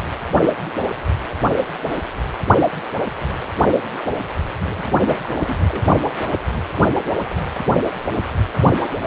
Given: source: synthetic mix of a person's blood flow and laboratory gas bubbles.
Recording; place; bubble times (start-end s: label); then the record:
Doppler ultrasound of blood flow; precordium
4.68-5.19 s: bubbles
5.21-5.31 s: bubbles
5.35-5.58 s: bubbles
5.68-5.84 s: bubbles
From the record:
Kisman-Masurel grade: 221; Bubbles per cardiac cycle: several, 3 to 8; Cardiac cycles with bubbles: 10 to 50%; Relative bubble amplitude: barely perceptible (0.100 to 0.250); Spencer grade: 2 (many but less than half of the cardiac periods contain bubble signals, singularly or in groups); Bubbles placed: anywhere in the cardiac cycle